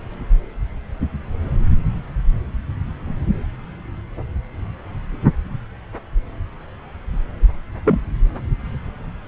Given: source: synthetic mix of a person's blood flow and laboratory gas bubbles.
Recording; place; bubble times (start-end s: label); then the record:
Doppler ultrasound of blood flow; subclavian vein
7.84-8.00 s: bubbles
From the record:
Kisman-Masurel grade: 123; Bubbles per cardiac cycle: 1 to 2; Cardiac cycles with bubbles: 10 to 50%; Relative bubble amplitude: loud (0.450 to 0.775); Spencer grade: 2 (many but less than half of the cardiac periods contain bubble signals, singularly or in groups); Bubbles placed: anywhere in the cardiac cycle